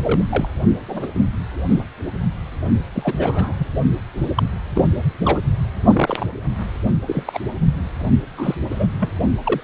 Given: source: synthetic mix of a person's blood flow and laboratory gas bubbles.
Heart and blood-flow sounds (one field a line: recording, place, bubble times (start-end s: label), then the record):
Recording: Doppler ultrasound of blood flow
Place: precordium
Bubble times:
0.04-0.23 s: bubbles
0.30-0.48 s: bubbles
0.88-1.07 s: bubbles
1.15-1.21 s: bubbles
1.69-1.86 s: bubbles
2.94-3.53 s: bubbles
3.58-3.67 s: bubbles
4.35-4.43 s: bubbles
4.75-4.85 s: bubbles
5.25-5.39 s: bubbles
5.92-6.26 s: bubbles
7.07-7.39 s: bubbles
8.37-8.54 s: bubbles
8.70-8.86 s: bubbles
8.99-9.11 s: bubbles
9.44-9.64 s: bubbles
From the record:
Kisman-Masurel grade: 242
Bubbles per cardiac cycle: several, 3 to 8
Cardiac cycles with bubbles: 100%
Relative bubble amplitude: moderate (0.250 to 0.450)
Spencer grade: 3 (all of the cardiac periods contain showers or single bubble signals, but not dominating or overriding the cardiac motion signals)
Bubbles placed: only in the low amplitude regions of the cardiac cycle